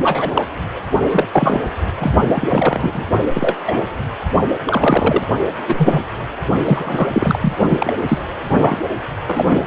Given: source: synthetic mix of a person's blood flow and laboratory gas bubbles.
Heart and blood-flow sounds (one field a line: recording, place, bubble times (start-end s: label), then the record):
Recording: Doppler ultrasound of blood flow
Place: precordium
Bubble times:
0.03-0.30 s: bubbles
0.34-0.42 s: bubbles
1.11-1.25 s: bubbles
1.32-1.59 s: bubbles
1.98-2.11 s: bubbles
2.27-3.06 s: bubbles
3.33-3.56 s: bubbles
3.65-3.85 s: bubbles
4.65-5.22 s: bubbles
5.67-6.00 s: bubbles
6.64-7.09 s: bubbles
7.12-7.38 s: bubbles
7.41-7.53 s: bubbles
7.69-7.93 s: bubbles
8.08-8.19 s: bubbles
8.50-8.76 s: bubbles
9.26-9.67 s: bubbles
From the record:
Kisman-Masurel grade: 243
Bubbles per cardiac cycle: several, 3 to 8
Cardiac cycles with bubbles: 100%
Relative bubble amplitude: loud (0.450 to 0.775)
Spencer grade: 3 (all of the cardiac periods contain showers or single bubble signals, but not dominating or overriding the cardiac motion signals)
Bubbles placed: only in the low amplitude regions of the cardiac cycle